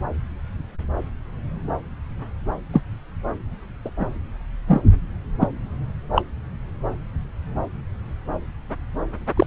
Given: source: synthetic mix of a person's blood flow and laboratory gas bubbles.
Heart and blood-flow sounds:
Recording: Doppler ultrasound of blood flow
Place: subclavian vein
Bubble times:
2.73-2.82 s: bubbles
3.84-3.90 s: bubbles
3.99-4.06 s: bubbles
4.67-4.81 s: bubbles
5.39-5.49 s: bubbles
6.12-6.22 s: bubbles
9.37-9.46 s: bubbles
From the record:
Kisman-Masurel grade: 123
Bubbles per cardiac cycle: 1 to 2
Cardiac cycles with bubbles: 10 to 50%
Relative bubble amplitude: loud (0.450 to 0.775)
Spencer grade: 2 (many but less than half of the cardiac periods contain bubble signals, singularly or in groups)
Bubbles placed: anywhere in the cardiac cycle

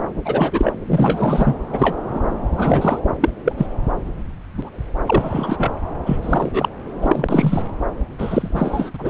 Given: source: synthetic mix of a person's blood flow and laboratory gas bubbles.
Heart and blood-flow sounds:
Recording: Doppler ultrasound of blood flow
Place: subclavian vein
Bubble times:
0.25-0.73 s: bubbles
0.86-1.54 s: bubbles
1.71-1.96 s: bubbles
2.14-2.19 s: bubbles
2.56-3.00 s: bubbles
3.21-3.29 s: bubbles
3.44-3.52 s: bubbles
3.58-3.67 s: bubbles
4.57-4.70 s: bubbles
5.07-5.71 s: bubbles
6.05-6.17 s: bubbles
6.22-6.68 s: bubbles
7.01-7.63 s: bubbles
8.18-8.90 s: bubbles
8.94-9.09 s: bubbles
From the record:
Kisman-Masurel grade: 243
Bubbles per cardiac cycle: several, 3 to 8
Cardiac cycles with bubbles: 100%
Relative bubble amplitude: loud (0.450 to 0.775)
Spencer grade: 3 (all of the cardiac periods contain showers or single bubble signals, but not dominating or overriding the cardiac motion signals)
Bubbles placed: anywhere in the cardiac cycle

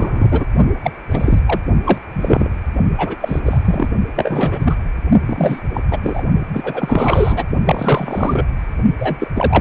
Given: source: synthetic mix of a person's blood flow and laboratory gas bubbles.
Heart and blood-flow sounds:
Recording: Doppler ultrasound of blood flow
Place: precordium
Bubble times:
0.00-0.46 s: bubbles
0.82-0.92 s: bubbles
1.11-1.40 s: bubbles
1.46-1.60 s: bubbles
1.84-1.98 s: bubbles
2.13-2.52 s: bubbles
2.98-3.16 s: bubbles
3.21-3.88 s: bubbles
4.15-4.75 s: bubbles
5.25-5.60 s: bubbles
5.73-5.81 s: bubbles
5.91-6.00 s: bubbles
6.02-6.23 s: bubbles
6.53-7.43 s: bubbles
7.65-8.47 s: bubbles
8.99-9.28 s: bubbles
9.35-9.61 s: bubbles
From the record:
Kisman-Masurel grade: 343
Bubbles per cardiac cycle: rolling drumbeat, 9 or more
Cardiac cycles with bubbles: 100%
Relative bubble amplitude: loud (0.450 to 0.775)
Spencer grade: 3 (all of the cardiac periods contain showers or single bubble signals, but not dominating or overriding the cardiac motion signals)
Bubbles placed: only in the low amplitude regions of the cardiac cycle

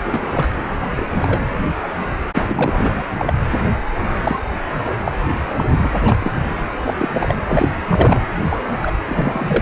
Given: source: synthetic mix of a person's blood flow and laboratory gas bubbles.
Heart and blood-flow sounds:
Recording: Doppler ultrasound of blood flow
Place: precordium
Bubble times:
0.04-0.52 s: bubbles
0.82-1.06 s: bubbles
1.19-1.44 s: bubbles
2.34-2.91 s: bubbles
2.94-3.04 s: bubbles
3.17-3.33 s: bubbles
4.23-4.40 s: bubbles
4.75-4.95 s: bubbles
5.05-5.12 s: bubbles
5.56-5.64 s: bubbles
5.70-5.90 s: bubbles
6.04-6.33 s: bubbles
6.85-6.94 s: bubbles
6.98-7.08 s: bubbles
7.13-7.35 s: bubbles
7.47-7.69 s: bubbles
7.89-8.20 s: bubbles
8.49-8.60 s: bubbles
8.82-8.91 s: bubbles
9.05-9.62 s: bubbles
From the record:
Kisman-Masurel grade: 243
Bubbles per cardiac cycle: several, 3 to 8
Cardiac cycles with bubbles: 100%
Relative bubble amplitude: loud (0.450 to 0.775)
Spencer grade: 3 (all of the cardiac periods contain showers or single bubble signals, but not dominating or overriding the cardiac motion signals)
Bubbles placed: anywhere in the cardiac cycle

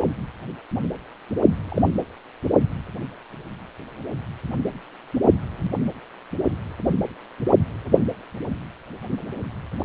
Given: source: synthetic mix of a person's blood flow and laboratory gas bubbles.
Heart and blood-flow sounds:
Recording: Doppler ultrasound of blood flow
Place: precordium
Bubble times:
1.68-1.82 s: bubbles
From the record:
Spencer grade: 1 (occasional bubble signal discernible with the cardiac motion signal, with majority of cardiac periods free of bubbles)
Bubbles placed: anywhere in the cardiac cycle

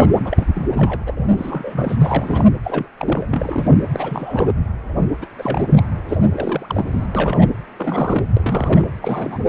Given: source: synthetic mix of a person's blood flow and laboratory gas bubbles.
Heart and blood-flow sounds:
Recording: Doppler ultrasound of blood flow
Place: precordium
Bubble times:
0.00-0.67 s: bubbles
0.72-1.03 s: bubbles
1.06-1.14 s: bubbles
1.16-1.29 s: bubbles
1.37-1.96 s: bubbles
2.00-2.47 s: bubbles
2.63-2.87 s: bubbles
2.98-3.26 s: bubbles
3.30-3.77 s: bubbles
3.91-4.52 s: bubbles
5.22-5.26 s: bubbles
5.38-5.67 s: bubbles
5.76-5.82 s: bubbles
6.08-6.18 s: bubbles
6.22-6.29 s: bubbles
6.32-7.07 s: bubbles
7.15-7.49 s: bubbles
7.77-8.29 s: bubbles
8.37-8.88 s: bubbles
9.02-9.39 s: bubbles
From the record:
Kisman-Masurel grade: 342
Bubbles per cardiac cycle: rolling drumbeat, 9 or more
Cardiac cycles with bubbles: 100%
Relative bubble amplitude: moderate (0.250 to 0.450)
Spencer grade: 3 (all of the cardiac periods contain showers or single bubble signals, but not dominating or overriding the cardiac motion signals)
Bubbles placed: anywhere in the cardiac cycle

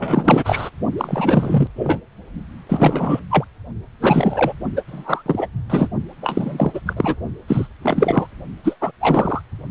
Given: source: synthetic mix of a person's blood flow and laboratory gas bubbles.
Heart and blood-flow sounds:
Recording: Doppler ultrasound of blood flow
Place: precordium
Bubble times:
0.00-0.70 s: bubbles
0.97-1.68 s: bubbles
1.76-2.00 s: bubbles
2.69-3.19 s: bubbles
3.31-3.44 s: bubbles
4.01-4.54 s: bubbles
4.76-4.82 s: bubbles
4.87-5.23 s: bubbles
5.26-5.47 s: bubbles
5.70-5.89 s: bubbles
6.22-6.80 s: bubbles
6.86-6.93 s: bubbles
6.97-7.16 s: bubbles
7.48-7.68 s: bubbles
7.83-8.27 s: bubbles
8.64-8.76 s: bubbles
8.81-8.91 s: bubbles
9.00-9.41 s: bubbles
From the record:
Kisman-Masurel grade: 343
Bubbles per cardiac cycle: rolling drumbeat, 9 or more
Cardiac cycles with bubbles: 100%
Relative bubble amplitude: loud (0.450 to 0.775)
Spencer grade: 3 (all of the cardiac periods contain showers or single bubble signals, but not dominating or overriding the cardiac motion signals)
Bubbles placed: only in the low amplitude regions of the cardiac cycle

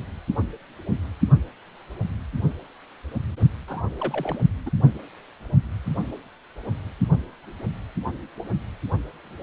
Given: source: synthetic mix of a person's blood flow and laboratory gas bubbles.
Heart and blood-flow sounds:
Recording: Doppler ultrasound of blood flow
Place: precordium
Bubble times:
3.68-3.82 s: bubbles
4.00-4.38 s: bubbles
4.66-4.70 s: bubbles
From the record:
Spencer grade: 1 (occasional bubble signal discernible with the cardiac motion signal, with majority of cardiac periods free of bubbles)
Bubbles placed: only in the low amplitude regions of the cardiac cycle

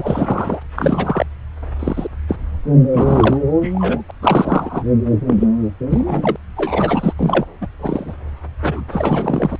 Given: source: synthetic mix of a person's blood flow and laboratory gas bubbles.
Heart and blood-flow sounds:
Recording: Doppler ultrasound of blood flow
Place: subclavian vein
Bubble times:
0.00-0.63 s: bubbles
0.76-1.25 s: bubbles
1.79-2.08 s: bubbles
2.28-2.39 s: bubbles
2.94-3.38 s: bubbles
3.61-4.02 s: bubbles
4.08-4.11 s: bubbles
4.22-4.83 s: bubbles
5.27-5.48 s: bubbles
5.91-6.36 s: bubbles
6.57-7.13 s: bubbles
7.17-7.46 s: bubbles
7.61-7.67 s: bubbles
7.79-8.13 s: bubbles
8.62-8.84 s: bubbles
8.91-9.56 s: bubbles
From the record:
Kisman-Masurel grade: 243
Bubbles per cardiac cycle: several, 3 to 8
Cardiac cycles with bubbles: 100%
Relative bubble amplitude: loud (0.450 to 0.775)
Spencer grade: 3 (all of the cardiac periods contain showers or single bubble signals, but not dominating or overriding the cardiac motion signals)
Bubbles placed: anywhere in the cardiac cycle

